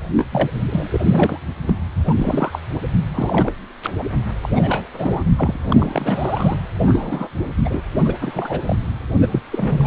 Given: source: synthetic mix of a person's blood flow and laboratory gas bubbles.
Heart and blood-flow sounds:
Doppler ultrasound of blood flow; precordium
0.16-0.26 s: bubbles
0.32-0.50 s: bubbles
0.66-0.88 s: bubbles
0.91-1.43 s: bubbles
1.67-1.75 s: bubbles
2.06-2.59 s: bubbles
3.14-3.52 s: bubbles
3.82-3.90 s: bubbles
3.98-4.04 s: bubbles
4.43-4.50 s: bubbles
4.56-4.88 s: bubbles
4.93-5.23 s: bubbles
5.37-5.56 s: bubbles
5.62-6.59 s: bubbles
6.81-7.29 s: bubbles
7.65-7.82 s: bubbles
8.04-8.14 s: bubbles
8.21-8.75 s: bubbles
9.21-9.28 s: bubbles
9.31-9.41 s: bubbles
9.51-9.87 s: bubbles
From the record:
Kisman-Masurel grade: 342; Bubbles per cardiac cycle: rolling drumbeat, 9 or more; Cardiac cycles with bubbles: 100%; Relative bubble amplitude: moderate (0.250 to 0.450); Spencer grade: 3 (all of the cardiac periods contain showers or single bubble signals, but not dominating or overriding the cardiac motion signals); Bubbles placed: anywhere in the cardiac cycle

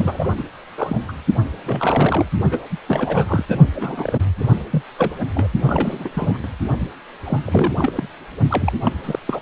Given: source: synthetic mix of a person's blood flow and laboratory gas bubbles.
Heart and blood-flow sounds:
Doppler ultrasound of blood flow; precordium
0.00-0.44 s: bubbles
0.77-0.97 s: bubbles
1.08-1.12 s: bubbles
1.65-2.31 s: bubbles
2.51-2.58 s: bubbles
2.71-2.77 s: bubbles
2.87-3.42 s: bubbles
3.48-3.56 s: bubbles
3.75-4.20 s: bubbles
4.37-4.54 s: bubbles
4.70-4.82 s: bubbles
4.98-5.14 s: bubbles
5.35-5.48 s: bubbles
5.67-6.38 s: bubbles
6.43-6.47 s: bubbles
6.80-6.88 s: bubbles
7.25-7.39 s: bubbles
7.45-8.08 s: bubbles
8.49-8.72 s: bubbles
8.83-8.92 s: bubbles
9.04-9.19 s: bubbles
9.26-9.40 s: bubbles
From the record:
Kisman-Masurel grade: 342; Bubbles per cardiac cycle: rolling drumbeat, 9 or more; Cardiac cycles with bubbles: 100%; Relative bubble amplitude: moderate (0.250 to 0.450); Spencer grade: 3 (all of the cardiac periods contain showers or single bubble signals, but not dominating or overriding the cardiac motion signals); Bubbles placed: only in the low amplitude regions of the cardiac cycle

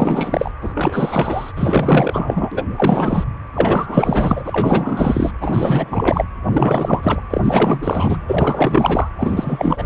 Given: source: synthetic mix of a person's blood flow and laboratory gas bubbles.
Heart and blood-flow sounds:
Doppler ultrasound of blood flow; precordium
0.00-0.52 s: bubbles
0.61-1.52 s: bubbles
1.54-2.63 s: bubbles
2.76-3.24 s: bubbles
3.53-5.32 s: bubbles
5.41-6.25 s: bubbles
6.45-7.21 s: bubbles
7.30-8.22 s: bubbles
8.27-9.09 s: bubbles
9.18-9.86 s: bubbles
From the record:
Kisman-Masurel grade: 444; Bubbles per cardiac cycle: continuous sound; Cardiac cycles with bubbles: 100%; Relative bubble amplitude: maximal (0.775 to 0.999); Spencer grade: 4 (maximum detectable bubble signal sounding continuously throughout systole and diastole of every cardiac period, and overriding the amplitude of the normal cardiac signals); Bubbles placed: anywhere in the cardiac cycle

